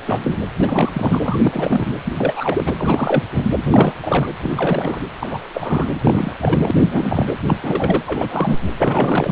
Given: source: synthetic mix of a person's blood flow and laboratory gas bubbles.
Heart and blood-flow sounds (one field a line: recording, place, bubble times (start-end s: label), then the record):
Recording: Doppler ultrasound of blood flow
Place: precordium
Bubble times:
0.05-0.39 s: bubbles
0.57-1.19 s: bubbles
1.22-1.38 s: bubbles
1.43-1.85 s: bubbles
2.05-2.12 s: bubbles
2.18-2.73 s: bubbles
2.77-3.23 s: bubbles
3.33-3.44 s: bubbles
3.71-3.94 s: bubbles
4.01-4.29 s: bubbles
4.43-5.00 s: bubbles
5.20-5.39 s: bubbles
5.54-5.86 s: bubbles
6.03-6.32 s: bubbles
6.40-6.71 s: bubbles
6.79-7.32 s: bubbles
7.47-7.58 s: bubbles
7.63-8.03 s: bubbles
8.06-8.60 s: bubbles
8.78-9.32 s: bubbles
From the record:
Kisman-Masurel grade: 342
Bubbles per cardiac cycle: rolling drumbeat, 9 or more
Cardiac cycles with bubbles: 100%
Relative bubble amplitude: moderate (0.250 to 0.450)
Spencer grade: 3 (all of the cardiac periods contain showers or single bubble signals, but not dominating or overriding the cardiac motion signals)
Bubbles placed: anywhere in the cardiac cycle